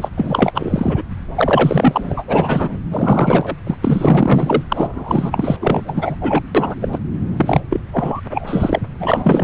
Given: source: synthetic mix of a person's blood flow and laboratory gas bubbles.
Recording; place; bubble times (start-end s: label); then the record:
Doppler ultrasound of blood flow; subclavian vein
0.00-0.08 s: bubbles
0.17-0.52 s: bubbles
0.54-1.02 s: bubbles
1.35-2.24 s: bubbles
2.27-2.69 s: bubbles
2.91-3.56 s: bubbles
3.66-3.75 s: bubbles
3.81-4.62 s: bubbles
4.69-5.56 s: bubbles
5.60-6.17 s: bubbles
6.21-6.43 s: bubbles
6.54-6.75 s: bubbles
6.81-6.88 s: bubbles
6.92-6.99 s: bubbles
7.36-7.60 s: bubbles
7.69-7.81 s: bubbles
7.92-8.21 s: bubbles
8.30-8.81 s: bubbles
8.98-9.44 s: bubbles
From the record:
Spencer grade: 4 (maximum detectable bubble signal sounding continuously throughout systole and diastole of every cardiac period, and overriding the amplitude of the normal cardiac signals); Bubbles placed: anywhere in the cardiac cycle